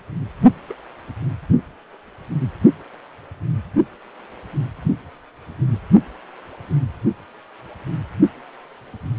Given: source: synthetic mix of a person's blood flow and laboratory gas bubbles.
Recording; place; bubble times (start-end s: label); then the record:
Doppler ultrasound of blood flow; precordium
0.69-0.74 s: bubbles
From the record:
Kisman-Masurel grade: 111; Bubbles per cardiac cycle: 1 to 2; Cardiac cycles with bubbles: 1 to 10%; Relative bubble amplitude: barely perceptible (0.100 to 0.250); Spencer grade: 1 (occasional bubble signal discernible with the cardiac motion signal, with majority of cardiac periods free of bubbles); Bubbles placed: anywhere in the cardiac cycle